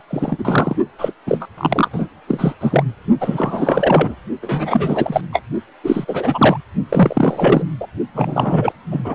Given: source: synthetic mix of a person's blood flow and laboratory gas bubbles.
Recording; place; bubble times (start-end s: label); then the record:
Doppler ultrasound of blood flow; precordium
0.09-0.76 s: bubbles
0.98-1.12 s: bubbles
1.27-1.47 s: bubbles
1.57-1.88 s: bubbles
1.92-2.08 s: bubbles
2.27-2.54 s: bubbles
2.60-2.83 s: bubbles
3.20-4.15 s: bubbles
4.42-5.21 s: bubbles
5.33-5.42 s: bubbles
5.83-6.61 s: bubbles
6.89-7.64 s: bubbles
7.80-7.87 s: bubbles
8.14-8.72 s: bubbles
8.91-9.15 s: bubbles
From the record:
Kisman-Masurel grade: 343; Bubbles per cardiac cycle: rolling drumbeat, 9 or more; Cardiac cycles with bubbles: 100%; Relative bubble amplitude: loud (0.450 to 0.775); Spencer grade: 3 (all of the cardiac periods contain showers or single bubble signals, but not dominating or overriding the cardiac motion signals); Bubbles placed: only in the low amplitude regions of the cardiac cycle